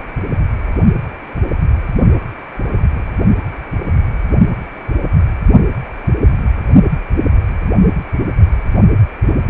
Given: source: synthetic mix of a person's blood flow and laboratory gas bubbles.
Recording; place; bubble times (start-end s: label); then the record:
Doppler ultrasound of blood flow; precordium
2.74-3.10 s: bubbles
From the record:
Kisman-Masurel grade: 111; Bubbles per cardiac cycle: 1 to 2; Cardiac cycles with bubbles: 1 to 10%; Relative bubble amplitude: barely perceptible (0.100 to 0.250); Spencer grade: 1 (occasional bubble signal discernible with the cardiac motion signal, with majority of cardiac periods free of bubbles); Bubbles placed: only in the low amplitude regions of the cardiac cycle